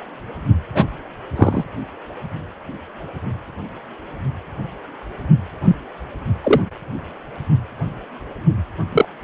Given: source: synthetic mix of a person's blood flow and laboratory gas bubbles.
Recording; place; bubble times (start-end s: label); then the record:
Doppler ultrasound of blood flow; precordium
0.75-0.86 s: bubbles
1.35-1.64 s: bubbles
5.64-5.76 s: bubbles
6.43-6.62 s: bubbles
8.92-9.05 s: bubbles
From the record:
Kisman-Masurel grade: 123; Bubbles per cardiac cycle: 1 to 2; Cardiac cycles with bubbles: 10 to 50%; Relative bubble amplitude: loud (0.450 to 0.775); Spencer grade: 2 (many but less than half of the cardiac periods contain bubble signals, singularly or in groups); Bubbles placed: only in the low amplitude regions of the cardiac cycle